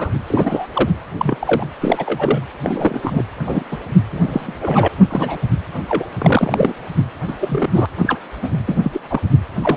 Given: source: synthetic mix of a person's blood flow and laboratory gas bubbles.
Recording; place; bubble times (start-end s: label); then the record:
Doppler ultrasound of blood flow; precordium
0.00-0.10 s: bubbles
0.27-0.67 s: bubbles
0.73-0.89 s: bubbles
1.18-1.68 s: bubbles
1.81-2.41 s: bubbles
2.63-3.00 s: bubbles
3.03-3.24 s: bubbles
3.34-3.65 s: bubbles
3.71-3.77 s: bubbles
4.10-4.88 s: bubbles
5.10-5.38 s: bubbles
5.88-6.06 s: bubbles
6.18-6.73 s: bubbles
7.27-7.37 s: bubbles
7.40-7.69 s: bubbles
7.74-7.86 s: bubbles
7.99-8.20 s: bubbles
8.43-8.49 s: bubbles
8.68-8.78 s: bubbles
8.83-9.00 s: bubbles
9.09-9.21 s: bubbles
9.62-9.77 s: bubbles
From the record:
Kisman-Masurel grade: 243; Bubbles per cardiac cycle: several, 3 to 8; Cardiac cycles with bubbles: 100%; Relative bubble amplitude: loud (0.450 to 0.775); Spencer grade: 3 (all of the cardiac periods contain showers or single bubble signals, but not dominating or overriding the cardiac motion signals); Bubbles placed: anywhere in the cardiac cycle